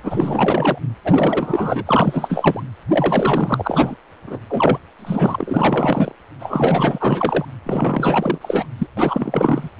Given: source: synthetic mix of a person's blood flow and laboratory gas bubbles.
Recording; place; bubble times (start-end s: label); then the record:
Doppler ultrasound of blood flow; precordium
0.03-0.78 s: bubbles
1.04-2.63 s: bubbles
2.89-3.95 s: bubbles
4.27-4.40 s: bubbles
4.49-4.79 s: bubbles
4.99-6.12 s: bubbles
6.39-7.45 s: bubbles
7.65-8.38 s: bubbles
8.41-8.67 s: bubbles
8.78-8.87 s: bubbles
8.97-9.70 s: bubbles
From the record:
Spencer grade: 4 (maximum detectable bubble signal sounding continuously throughout systole and diastole of every cardiac period, and overriding the amplitude of the normal cardiac signals); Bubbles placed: anywhere in the cardiac cycle